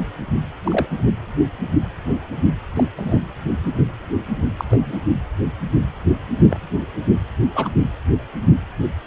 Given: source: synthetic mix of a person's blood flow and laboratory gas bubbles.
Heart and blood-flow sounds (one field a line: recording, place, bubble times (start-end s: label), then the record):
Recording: Doppler ultrasound of blood flow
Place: precordium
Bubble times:
0.64-0.88 s: bubbles
2.76-2.83 s: bubbles
2.97-3.21 s: bubbles
3.66-3.71 s: bubbles
4.57-4.65 s: bubbles
4.70-4.97 s: bubbles
6.50-6.60 s: bubbles
7.54-7.68 s: bubbles
From the record:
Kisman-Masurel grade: 122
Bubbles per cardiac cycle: 1 to 2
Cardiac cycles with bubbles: 10 to 50%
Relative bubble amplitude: moderate (0.250 to 0.450)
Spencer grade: 2 (many but less than half of the cardiac periods contain bubble signals, singularly or in groups)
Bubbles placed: anywhere in the cardiac cycle